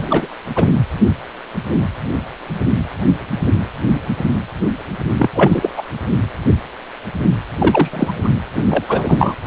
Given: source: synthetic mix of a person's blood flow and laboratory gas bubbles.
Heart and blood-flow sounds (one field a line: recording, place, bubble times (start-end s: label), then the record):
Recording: Doppler ultrasound of blood flow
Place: precordium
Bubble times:
0.00-0.28 s: bubbles
0.55-0.68 s: bubbles
5.18-5.31 s: bubbles
5.35-5.71 s: bubbles
5.76-5.84 s: bubbles
7.58-7.91 s: bubbles
7.93-8.14 s: bubbles
8.24-8.29 s: bubbles
8.54-8.64 s: bubbles
8.69-8.84 s: bubbles
8.88-9.36 s: bubbles
From the record:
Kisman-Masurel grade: 223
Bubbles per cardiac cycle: several, 3 to 8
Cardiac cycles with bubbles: 10 to 50%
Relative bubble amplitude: loud (0.450 to 0.775)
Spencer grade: 2 (many but less than half of the cardiac periods contain bubble signals, singularly or in groups)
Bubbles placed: anywhere in the cardiac cycle